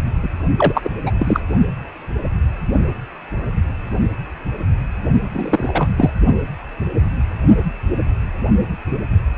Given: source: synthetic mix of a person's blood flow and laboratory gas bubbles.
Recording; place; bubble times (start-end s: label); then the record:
Doppler ultrasound of blood flow; precordium
0.22-0.29 s: bubbles
0.58-0.91 s: bubbles
1.06-1.11 s: bubbles
1.19-1.40 s: bubbles
5.32-5.89 s: bubbles
5.98-6.10 s: bubbles
From the record:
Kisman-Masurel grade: 223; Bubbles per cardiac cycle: several, 3 to 8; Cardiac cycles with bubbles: 10 to 50%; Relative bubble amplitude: loud (0.450 to 0.775); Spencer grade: 2 (many but less than half of the cardiac periods contain bubble signals, singularly or in groups); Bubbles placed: only in the low amplitude regions of the cardiac cycle